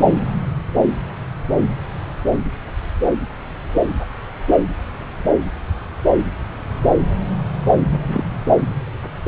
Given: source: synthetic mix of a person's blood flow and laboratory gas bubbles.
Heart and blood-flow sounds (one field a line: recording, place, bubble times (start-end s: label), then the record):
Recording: Doppler ultrasound of blood flow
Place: subclavian vein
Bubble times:
7.89-8.24 s: bubbles
From the record:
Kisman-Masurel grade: 112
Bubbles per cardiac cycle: 1 to 2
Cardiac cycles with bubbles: 1 to 10%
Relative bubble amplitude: moderate (0.250 to 0.450)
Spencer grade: 1 (occasional bubble signal discernible with the cardiac motion signal, with majority of cardiac periods free of bubbles)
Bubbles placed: anywhere in the cardiac cycle